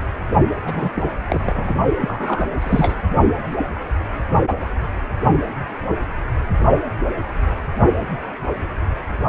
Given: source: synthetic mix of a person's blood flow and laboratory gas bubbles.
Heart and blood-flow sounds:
Doppler ultrasound of blood flow; precordium
0.64-0.90 s: bubbles
0.96-1.11 s: bubbles
1.28-1.73 s: bubbles
1.99-2.48 s: bubbles
2.60-2.95 s: bubbles
From the record:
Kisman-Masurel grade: 222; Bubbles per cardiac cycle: several, 3 to 8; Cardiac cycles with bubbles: 10 to 50%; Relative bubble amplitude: moderate (0.250 to 0.450); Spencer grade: 2 (many but less than half of the cardiac periods contain bubble signals, singularly or in groups); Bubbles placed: only in the low amplitude regions of the cardiac cycle

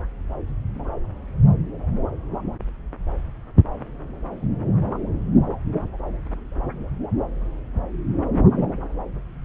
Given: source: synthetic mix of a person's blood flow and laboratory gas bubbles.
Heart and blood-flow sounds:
Doppler ultrasound of blood flow; subclavian vein
8.52-8.69 s: bubbles
From the record:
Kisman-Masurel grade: 112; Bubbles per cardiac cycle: 1 to 2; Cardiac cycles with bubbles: 1 to 10%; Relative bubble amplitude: moderate (0.250 to 0.450); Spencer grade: 1 (occasional bubble signal discernible with the cardiac motion signal, with majority of cardiac periods free of bubbles); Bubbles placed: anywhere in the cardiac cycle

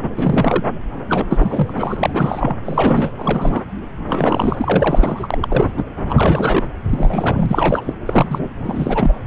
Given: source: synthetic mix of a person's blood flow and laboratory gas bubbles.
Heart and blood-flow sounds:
Doppler ultrasound of blood flow; subclavian vein
0.02-0.10 s: bubbles
0.16-0.63 s: bubbles
1.08-1.24 s: bubbles
1.29-1.72 s: bubbles
1.78-2.10 s: bubbles
2.12-2.54 s: bubbles
2.65-3.11 s: bubbles
3.18-3.63 s: bubbles
4.07-5.28 s: bubbles
5.30-5.38 s: bubbles
5.42-5.84 s: bubbles
6.08-6.67 s: bubbles
6.90-7.95 s: bubbles
8.05-8.48 s: bubbles
8.63-9.13 s: bubbles
From the record:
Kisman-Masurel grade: 342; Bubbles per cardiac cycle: rolling drumbeat, 9 or more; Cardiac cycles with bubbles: 100%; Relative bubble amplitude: moderate (0.250 to 0.450); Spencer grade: 3 (all of the cardiac periods contain showers or single bubble signals, but not dominating or overriding the cardiac motion signals); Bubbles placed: anywhere in the cardiac cycle

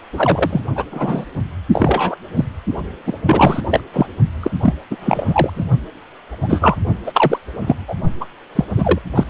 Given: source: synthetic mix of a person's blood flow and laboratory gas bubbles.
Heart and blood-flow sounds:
Doppler ultrasound of blood flow; precordium
0.12-0.61 s: bubbles
0.76-0.84 s: bubbles
0.92-1.26 s: bubbles
1.73-2.16 s: bubbles
2.36-2.45 s: bubbles
3.06-3.13 s: bubbles
3.25-3.61 s: bubbles
3.71-3.80 s: bubbles
3.92-4.07 s: bubbles
4.42-4.50 s: bubbles
4.62-4.74 s: bubbles
4.91-4.96 s: bubbles
5.00-5.50 s: bubbles
5.55-5.64 s: bubbles
6.42-6.76 s: bubbles
7.05-7.39 s: bubbles
7.60-7.75 s: bubbles
7.88-7.96 s: bubbles
8.20-8.25 s: bubbles
8.55-8.64 s: bubbles
8.75-8.98 s: bubbles
9.14-9.24 s: bubbles
From the record:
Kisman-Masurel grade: 243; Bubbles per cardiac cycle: several, 3 to 8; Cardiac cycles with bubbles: 100%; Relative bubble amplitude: loud (0.450 to 0.775); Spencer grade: 3 (all of the cardiac periods contain showers or single bubble signals, but not dominating or overriding the cardiac motion signals); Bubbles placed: only in the low amplitude regions of the cardiac cycle

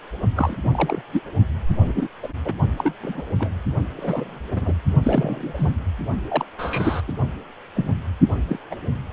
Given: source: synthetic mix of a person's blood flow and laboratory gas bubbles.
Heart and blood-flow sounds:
Doppler ultrasound of blood flow; precordium
0.35-0.57 s: bubbles
0.65-1.03 s: bubbles
1.12-1.22 s: bubbles
1.84-1.93 s: bubbles
1.95-2.07 s: bubbles
2.22-2.29 s: bubbles
2.45-2.53 s: bubbles
2.76-2.93 s: bubbles
3.03-3.22 s: bubbles
3.38-3.50 s: bubbles
3.96-4.40 s: bubbles
4.51-4.74 s: bubbles
5.02-5.72 s: bubbles
6.29-6.44 s: bubbles
6.58-7.01 s: bubbles
7.08-7.12 s: bubbles
7.76-7.92 s: bubbles
8.48-8.59 s: bubbles
8.71-8.74 s: bubbles
From the record:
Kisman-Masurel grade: 242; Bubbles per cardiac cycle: several, 3 to 8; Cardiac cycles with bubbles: 100%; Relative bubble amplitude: moderate (0.250 to 0.450); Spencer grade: 3 (all of the cardiac periods contain showers or single bubble signals, but not dominating or overriding the cardiac motion signals); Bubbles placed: only in the low amplitude regions of the cardiac cycle

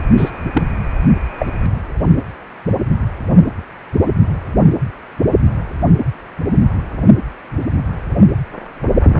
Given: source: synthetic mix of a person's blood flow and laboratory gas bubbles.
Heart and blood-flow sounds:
Doppler ultrasound of blood flow; precordium
0.17-0.30 s: bubbles
0.53-0.62 s: bubbles
1.40-1.46 s: bubbles
From the record:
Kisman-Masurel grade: 123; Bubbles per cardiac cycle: 1 to 2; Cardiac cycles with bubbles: 10 to 50%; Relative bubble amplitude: loud (0.450 to 0.775); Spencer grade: 2 (many but less than half of the cardiac periods contain bubble signals, singularly or in groups); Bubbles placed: anywhere in the cardiac cycle

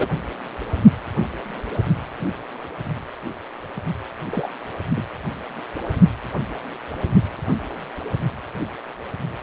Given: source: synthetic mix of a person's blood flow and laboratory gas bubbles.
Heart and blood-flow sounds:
Doppler ultrasound of blood flow; precordium
0.00-0.09 s: bubbles
4.32-4.50 s: bubbles
4.96-5.04 s: bubbles
From the record:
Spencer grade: 2 (many but less than half of the cardiac periods contain bubble signals, singularly or in groups); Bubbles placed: only in the low amplitude regions of the cardiac cycle

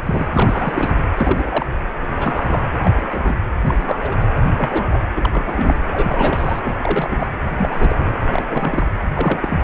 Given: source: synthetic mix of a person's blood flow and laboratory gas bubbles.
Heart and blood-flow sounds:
Doppler ultrasound of blood flow; precordium
0.05-0.27 s: bubbles
0.32-0.93 s: bubbles
1.17-1.66 s: bubbles
2.20-2.62 s: bubbles
2.83-2.91 s: bubbles
2.97-3.37 s: bubbles
3.63-4.23 s: bubbles
4.56-5.06 s: bubbles
5.16-5.76 s: bubbles
5.92-6.59 s: bubbles
6.63-6.76 s: bubbles
6.83-7.27 s: bubbles
7.58-7.98 s: bubbles
8.33-8.90 s: bubbles
9.00-9.05 s: bubbles
9.15-9.63 s: bubbles
From the record:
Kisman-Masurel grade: 242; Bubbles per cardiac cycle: several, 3 to 8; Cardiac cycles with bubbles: 100%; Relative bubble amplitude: moderate (0.250 to 0.450); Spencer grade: 3 (all of the cardiac periods contain showers or single bubble signals, but not dominating or overriding the cardiac motion signals); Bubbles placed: anywhere in the cardiac cycle

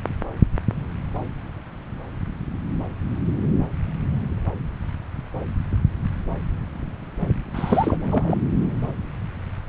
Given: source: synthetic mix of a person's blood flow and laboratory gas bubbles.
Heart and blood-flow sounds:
Doppler ultrasound of blood flow; subclavian vein
7.54-7.97 s: bubbles
8.11-8.38 s: bubbles
From the record:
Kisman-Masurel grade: 213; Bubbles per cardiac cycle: several, 3 to 8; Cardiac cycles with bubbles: 1 to 10%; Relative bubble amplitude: loud (0.450 to 0.775); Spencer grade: 1 (occasional bubble signal discernible with the cardiac motion signal, with majority of cardiac periods free of bubbles); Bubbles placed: anywhere in the cardiac cycle

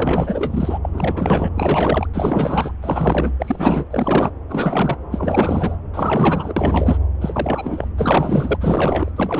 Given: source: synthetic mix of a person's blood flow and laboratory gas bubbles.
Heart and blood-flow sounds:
Doppler ultrasound of blood flow; subclavian vein
0.00-0.78 s: bubbles
0.84-0.89 s: bubbles
0.92-1.49 s: bubbles
1.55-2.07 s: bubbles
2.13-2.71 s: bubbles
2.81-3.33 s: bubbles
3.39-3.86 s: bubbles
3.91-4.31 s: bubbles
4.49-4.96 s: bubbles
5.11-5.76 s: bubbles
5.94-6.54 s: bubbles
6.56-6.98 s: bubbles
7.21-7.88 s: bubbles
7.97-8.57 s: bubbles
8.61-9.11 s: bubbles
9.16-9.40 s: bubbles
From the record:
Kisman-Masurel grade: 444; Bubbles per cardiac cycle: continuous sound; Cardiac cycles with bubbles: 100%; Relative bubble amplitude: maximal (0.775 to 0.999); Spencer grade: 4 (maximum detectable bubble signal sounding continuously throughout systole and diastole of every cardiac period, and overriding the amplitude of the normal cardiac signals); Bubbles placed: anywhere in the cardiac cycle

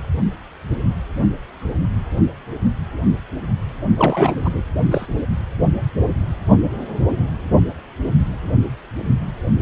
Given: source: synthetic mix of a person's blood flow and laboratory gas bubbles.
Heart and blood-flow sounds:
Doppler ultrasound of blood flow; precordium
3.97-4.63 s: bubbles
4.91-5.06 s: bubbles
From the record:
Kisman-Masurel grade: 212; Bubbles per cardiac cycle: several, 3 to 8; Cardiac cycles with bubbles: 1 to 10%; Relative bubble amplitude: moderate (0.250 to 0.450); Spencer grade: 1 (occasional bubble signal discernible with the cardiac motion signal, with majority of cardiac periods free of bubbles); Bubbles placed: only in the low amplitude regions of the cardiac cycle

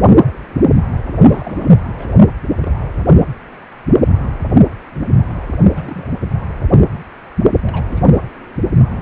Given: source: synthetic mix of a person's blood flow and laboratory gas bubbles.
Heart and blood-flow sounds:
Doppler ultrasound of blood flow; precordium
1.26-1.70 s: bubbles
1.99-2.09 s: bubbles
2.18-2.25 s: bubbles
2.60-2.76 s: bubbles
5.71-6.11 s: bubbles
7.63-8.18 s: bubbles
From the record:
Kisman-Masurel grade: 221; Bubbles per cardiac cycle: several, 3 to 8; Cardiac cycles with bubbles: 10 to 50%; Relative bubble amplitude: barely perceptible (0.100 to 0.250); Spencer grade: 2 (many but less than half of the cardiac periods contain bubble signals, singularly or in groups); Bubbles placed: anywhere in the cardiac cycle

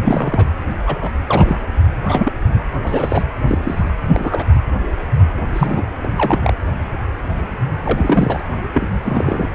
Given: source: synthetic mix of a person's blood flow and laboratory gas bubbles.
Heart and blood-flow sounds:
Doppler ultrasound of blood flow; precordium
0.04-0.46 s: bubbles
0.86-0.98 s: bubbles
1.01-1.11 s: bubbles
1.28-1.58 s: bubbles
2.06-2.33 s: bubbles
2.83-3.23 s: bubbles
3.48-3.58 s: bubbles
3.65-3.90 s: bubbles
4.14-4.61 s: bubbles
5.54-5.83 s: bubbles
6.03-6.08 s: bubbles
6.17-6.54 s: bubbles
7.84-8.40 s: bubbles
8.73-8.87 s: bubbles
9.04-9.48 s: bubbles
From the record:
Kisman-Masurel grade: 233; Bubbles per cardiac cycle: several, 3 to 8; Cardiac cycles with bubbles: 50 to 99%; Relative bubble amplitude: loud (0.450 to 0.775); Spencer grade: 3 (all of the cardiac periods contain showers or single bubble signals, but not dominating or overriding the cardiac motion signals); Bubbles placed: anywhere in the cardiac cycle

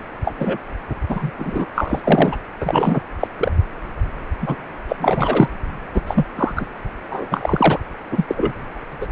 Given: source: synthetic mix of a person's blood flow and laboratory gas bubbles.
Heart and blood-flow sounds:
Doppler ultrasound of blood flow; precordium
0.25-0.34 s: bubbles
0.38-0.57 s: bubbles
1.08-1.31 s: bubbles
1.38-1.66 s: bubbles
1.74-2.00 s: bubbles
2.04-2.36 s: bubbles
2.60-3.00 s: bubbles
3.19-3.27 s: bubbles
3.38-3.51 s: bubbles
4.42-4.62 s: bubbles
4.88-4.93 s: bubbles
5.00-5.49 s: bubbles
5.94-6.02 s: bubbles
6.07-6.25 s: bubbles
6.35-6.66 s: bubbles
7.10-7.26 s: bubbles
7.31-7.79 s: bubbles
8.11-8.25 s: bubbles
8.28-8.52 s: bubbles
9.00-9.06 s: bubbles
From the record:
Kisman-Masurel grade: 243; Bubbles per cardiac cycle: several, 3 to 8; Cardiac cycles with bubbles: 100%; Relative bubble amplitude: loud (0.450 to 0.775); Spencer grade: 3 (all of the cardiac periods contain showers or single bubble signals, but not dominating or overriding the cardiac motion signals); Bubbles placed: anywhere in the cardiac cycle

